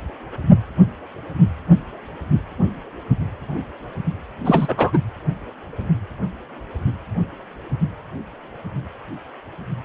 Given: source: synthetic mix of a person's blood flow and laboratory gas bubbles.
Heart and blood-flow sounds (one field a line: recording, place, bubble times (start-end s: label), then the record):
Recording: Doppler ultrasound of blood flow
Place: precordium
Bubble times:
4.45-4.98 s: bubbles
From the record:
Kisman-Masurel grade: 213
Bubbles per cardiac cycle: several, 3 to 8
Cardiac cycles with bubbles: 1 to 10%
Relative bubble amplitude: loud (0.450 to 0.775)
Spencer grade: 1 (occasional bubble signal discernible with the cardiac motion signal, with majority of cardiac periods free of bubbles)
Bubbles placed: anywhere in the cardiac cycle